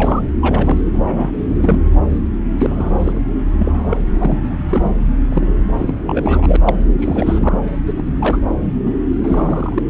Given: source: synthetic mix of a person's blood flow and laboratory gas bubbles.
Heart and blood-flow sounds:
Doppler ultrasound of blood flow; subclavian vein
0.00-0.21 s: bubbles
0.41-0.77 s: bubbles
0.94-1.80 s: bubbles
2.08-2.20 s: bubbles
2.58-2.94 s: bubbles
2.98-3.21 s: bubbles
3.58-4.02 s: bubbles
4.18-4.38 s: bubbles
4.50-4.57 s: bubbles
4.71-4.91 s: bubbles
5.29-5.46 s: bubbles
5.79-5.95 s: bubbles
6.07-6.57 s: bubbles
6.63-6.75 s: bubbles
6.99-7.55 s: bubbles
7.67-7.71 s: bubbles
7.86-7.93 s: bubbles
7.97-8.12 s: bubbles
8.20-8.38 s: bubbles
8.85-8.91 s: bubbles
9.23-9.83 s: bubbles
9.87-9.90 s: bubbles
From the record:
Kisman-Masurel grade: 242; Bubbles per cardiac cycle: several, 3 to 8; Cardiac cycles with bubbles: 100%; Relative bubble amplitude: moderate (0.250 to 0.450); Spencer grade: 3 (all of the cardiac periods contain showers or single bubble signals, but not dominating or overriding the cardiac motion signals); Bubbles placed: anywhere in the cardiac cycle

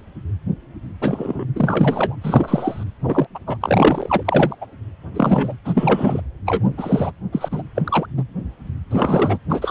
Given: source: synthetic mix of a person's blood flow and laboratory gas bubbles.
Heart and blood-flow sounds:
Doppler ultrasound of blood flow; precordium
1.02-1.45 s: bubbles
1.55-2.16 s: bubbles
2.21-2.84 s: bubbles
3.03-3.27 s: bubbles
3.34-3.39 s: bubbles
3.46-3.57 s: bubbles
3.61-4.55 s: bubbles
4.61-4.67 s: bubbles
5.14-5.54 s: bubbles
5.65-6.21 s: bubbles
6.46-6.69 s: bubbles
6.77-7.12 s: bubbles
7.32-7.49 s: bubbles
7.51-7.62 s: bubbles
7.75-8.06 s: bubbles
8.17-8.23 s: bubbles
8.91-9.38 s: bubbles
9.50-9.71 s: bubbles
From the record:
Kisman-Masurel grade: 233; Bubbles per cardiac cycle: several, 3 to 8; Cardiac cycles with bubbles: 50 to 99%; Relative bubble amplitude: loud (0.450 to 0.775); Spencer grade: 3 (all of the cardiac periods contain showers or single bubble signals, but not dominating or overriding the cardiac motion signals); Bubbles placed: anywhere in the cardiac cycle

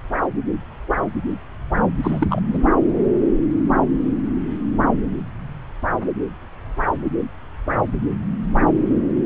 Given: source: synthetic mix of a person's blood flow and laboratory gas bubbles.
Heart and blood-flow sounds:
Doppler ultrasound of blood flow; subclavian vein
2.03-2.42 s: bubbles
2.53-2.58 s: bubbles
From the record:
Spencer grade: 1 (occasional bubble signal discernible with the cardiac motion signal, with majority of cardiac periods free of bubbles); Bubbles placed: anywhere in the cardiac cycle

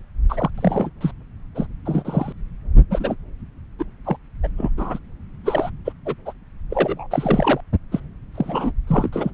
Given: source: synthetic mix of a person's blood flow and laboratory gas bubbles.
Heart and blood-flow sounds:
Doppler ultrasound of blood flow; subclavian vein
0.29-0.50 s: bubbles
0.57-0.90 s: bubbles
1.01-1.11 s: bubbles
1.55-1.67 s: bubbles
1.85-2.32 s: bubbles
2.90-3.15 s: bubbles
3.79-3.83 s: bubbles
4.05-4.17 s: bubbles
4.43-4.48 s: bubbles
4.57-4.71 s: bubbles
4.76-4.98 s: bubbles
5.44-5.70 s: bubbles
5.85-5.92 s: bubbles
6.05-6.14 s: bubbles
6.25-6.33 s: bubbles
6.70-7.06 s: bubbles
7.10-7.61 s: bubbles
7.91-8.00 s: bubbles
8.34-8.71 s: bubbles
8.87-9.08 s: bubbles
9.12-9.30 s: bubbles
From the record:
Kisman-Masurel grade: 232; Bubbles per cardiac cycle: several, 3 to 8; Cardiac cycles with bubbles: 50 to 99%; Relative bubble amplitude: moderate (0.250 to 0.450); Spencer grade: 3 (all of the cardiac periods contain showers or single bubble signals, but not dominating or overriding the cardiac motion signals); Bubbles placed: anywhere in the cardiac cycle

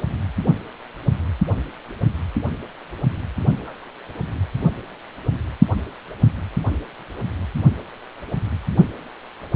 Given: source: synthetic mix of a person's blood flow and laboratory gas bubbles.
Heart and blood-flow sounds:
Doppler ultrasound of blood flow; precordium
3.56-3.88 s: bubbles
From the record:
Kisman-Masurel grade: 111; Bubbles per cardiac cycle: 1 to 2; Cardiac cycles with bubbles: 1 to 10%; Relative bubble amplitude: barely perceptible (0.100 to 0.250); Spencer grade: 1 (occasional bubble signal discernible with the cardiac motion signal, with majority of cardiac periods free of bubbles); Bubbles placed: only in the low amplitude regions of the cardiac cycle

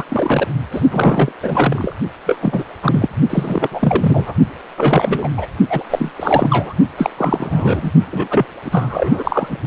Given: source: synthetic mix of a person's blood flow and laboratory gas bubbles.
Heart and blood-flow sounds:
Doppler ultrasound of blood flow; precordium
0.00-0.03 s: bubbles
0.09-0.48 s: bubbles
0.71-0.80 s: bubbles
0.91-1.32 s: bubbles
1.43-1.96 s: bubbles
2.27-2.38 s: bubbles
2.42-2.64 s: bubbles
2.82-3.08 s: bubbles
3.29-3.68 s: bubbles
3.71-4.36 s: bubbles
4.77-5.29 s: bubbles
5.37-5.46 s: bubbles
5.70-5.84 s: bubbles
5.90-6.12 s: bubbles
6.16-6.74 s: bubbles
6.97-7.10 s: bubbles
7.17-7.91 s: bubbles
8.11-8.46 s: bubbles
8.64-9.67 s: bubbles
From the record:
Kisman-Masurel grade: 343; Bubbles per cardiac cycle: rolling drumbeat, 9 or more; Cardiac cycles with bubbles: 100%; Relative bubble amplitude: loud (0.450 to 0.775); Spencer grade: 3 (all of the cardiac periods contain showers or single bubble signals, but not dominating or overriding the cardiac motion signals); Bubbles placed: only in the low amplitude regions of the cardiac cycle

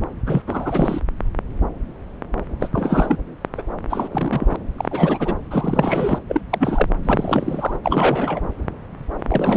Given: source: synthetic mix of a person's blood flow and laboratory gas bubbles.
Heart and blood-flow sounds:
Doppler ultrasound of blood flow; subclavian vein
0.26-0.42 s: bubbles
0.47-1.00 s: bubbles
2.59-2.69 s: bubbles
2.73-3.17 s: bubbles
3.57-3.62 s: bubbles
3.90-4.56 s: bubbles
4.78-5.33 s: bubbles
5.50-6.18 s: bubbles
6.29-6.42 s: bubbles
6.50-6.89 s: bubbles
7.04-7.76 s: bubbles
7.83-8.41 s: bubbles
9.29-9.57 s: bubbles
From the record:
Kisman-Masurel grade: 332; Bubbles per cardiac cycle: rolling drumbeat, 9 or more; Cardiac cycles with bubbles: 50 to 99%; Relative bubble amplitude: moderate (0.250 to 0.450); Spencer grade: 3 (all of the cardiac periods contain showers or single bubble signals, but not dominating or overriding the cardiac motion signals); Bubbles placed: anywhere in the cardiac cycle

